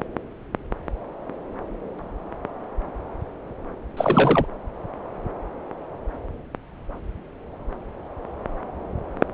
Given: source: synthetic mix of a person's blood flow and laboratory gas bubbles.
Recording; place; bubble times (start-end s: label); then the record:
Doppler ultrasound of blood flow; subclavian vein
3.96-4.46 s: bubbles
From the record:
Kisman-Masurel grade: 212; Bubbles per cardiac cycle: several, 3 to 8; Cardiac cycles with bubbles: 1 to 10%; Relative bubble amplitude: moderate (0.250 to 0.450); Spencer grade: 1 (occasional bubble signal discernible with the cardiac motion signal, with majority of cardiac periods free of bubbles); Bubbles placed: anywhere in the cardiac cycle